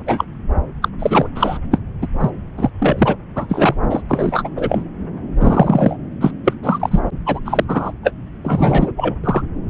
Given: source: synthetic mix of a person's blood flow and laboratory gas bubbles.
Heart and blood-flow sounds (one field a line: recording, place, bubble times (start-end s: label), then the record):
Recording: Doppler ultrasound of blood flow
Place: subclavian vein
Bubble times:
0.06-0.24 s: bubbles
0.81-0.89 s: bubbles
0.99-1.27 s: bubbles
1.35-1.58 s: bubbles
1.71-1.79 s: bubbles
2.02-2.08 s: bubbles
2.20-2.30 s: bubbles
2.57-2.70 s: bubbles
2.79-3.17 s: bubbles
3.35-3.75 s: bubbles
3.90-4.02 s: bubbles
4.08-4.49 s: bubbles
4.57-4.82 s: bubbles
5.38-5.96 s: bubbles
6.20-6.31 s: bubbles
6.44-6.53 s: bubbles
6.62-7.00 s: bubbles
7.25-7.39 s: bubbles
7.45-7.64 s: bubbles
7.68-7.92 s: bubbles
8.03-8.13 s: bubbles
8.43-8.92 s: bubbles
8.96-9.15 s: bubbles
9.23-9.42 s: bubbles
From the record:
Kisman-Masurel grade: 243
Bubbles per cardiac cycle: several, 3 to 8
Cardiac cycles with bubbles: 100%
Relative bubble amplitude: loud (0.450 to 0.775)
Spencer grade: 3 (all of the cardiac periods contain showers or single bubble signals, but not dominating or overriding the cardiac motion signals)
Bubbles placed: anywhere in the cardiac cycle